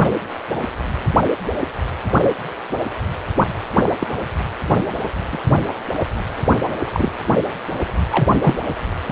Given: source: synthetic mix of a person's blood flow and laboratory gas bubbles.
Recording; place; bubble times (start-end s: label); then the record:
Doppler ultrasound of blood flow; precordium
3.83-3.93 s: bubbles
3.99-4.07 s: bubbles
5.32-5.38 s: bubbles
6.93-7.12 s: bubbles
8.12-8.28 s: bubbles
8.41-8.54 s: bubbles
From the record:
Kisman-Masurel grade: 122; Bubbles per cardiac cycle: 1 to 2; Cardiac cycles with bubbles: 10 to 50%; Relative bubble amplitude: moderate (0.250 to 0.450); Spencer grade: 2 (many but less than half of the cardiac periods contain bubble signals, singularly or in groups); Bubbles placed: anywhere in the cardiac cycle